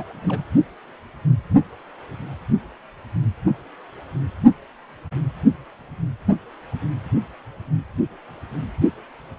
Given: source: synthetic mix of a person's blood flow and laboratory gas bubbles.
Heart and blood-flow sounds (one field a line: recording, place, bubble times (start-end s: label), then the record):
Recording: Doppler ultrasound of blood flow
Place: precordium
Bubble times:
0.00-0.06 s: bubbles
0.23-0.45 s: bubbles
From the record:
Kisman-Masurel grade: 211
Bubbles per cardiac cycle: several, 3 to 8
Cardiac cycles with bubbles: 1 to 10%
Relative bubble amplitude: barely perceptible (0.100 to 0.250)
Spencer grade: 1 (occasional bubble signal discernible with the cardiac motion signal, with majority of cardiac periods free of bubbles)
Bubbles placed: anywhere in the cardiac cycle